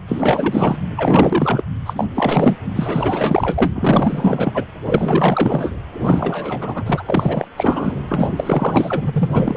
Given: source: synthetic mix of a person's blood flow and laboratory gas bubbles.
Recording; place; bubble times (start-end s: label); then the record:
Doppler ultrasound of blood flow; precordium
0.07-0.78 s: bubbles
0.97-1.64 s: bubbles
1.85-2.04 s: bubbles
2.14-2.56 s: bubbles
2.75-3.72 s: bubbles
3.75-4.65 s: bubbles
4.85-5.73 s: bubbles
5.92-7.03 s: bubbles
7.06-7.47 s: bubbles
7.57-7.95 s: bubbles
8.08-8.29 s: bubbles
8.36-9.57 s: bubbles
From the record:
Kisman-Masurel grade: 444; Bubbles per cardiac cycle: continuous sound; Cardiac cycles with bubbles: 100%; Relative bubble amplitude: maximal (0.775 to 0.999); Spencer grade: 4 (maximum detectable bubble signal sounding continuously throughout systole and diastole of every cardiac period, and overriding the amplitude of the normal cardiac signals); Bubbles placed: anywhere in the cardiac cycle